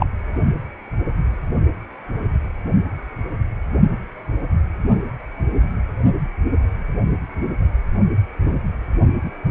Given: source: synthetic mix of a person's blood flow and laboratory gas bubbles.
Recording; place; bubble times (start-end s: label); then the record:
Doppler ultrasound of blood flow; precordium
0.00-0.06 s: bubbles
From the record:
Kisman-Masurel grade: 123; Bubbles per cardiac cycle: 1 to 2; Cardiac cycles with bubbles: 10 to 50%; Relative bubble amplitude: loud (0.450 to 0.775); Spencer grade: 2 (many but less than half of the cardiac periods contain bubble signals, singularly or in groups); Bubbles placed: only in the low amplitude regions of the cardiac cycle